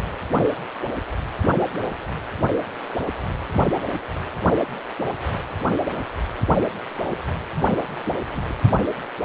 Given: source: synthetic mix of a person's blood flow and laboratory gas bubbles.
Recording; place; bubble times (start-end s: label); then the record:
Doppler ultrasound of blood flow; precordium
7.54-7.64 s: bubbles
8.04-8.13 s: bubbles
8.33-8.54 s: bubbles
From the record:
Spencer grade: 1 (occasional bubble signal discernible with the cardiac motion signal, with majority of cardiac periods free of bubbles); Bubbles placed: anywhere in the cardiac cycle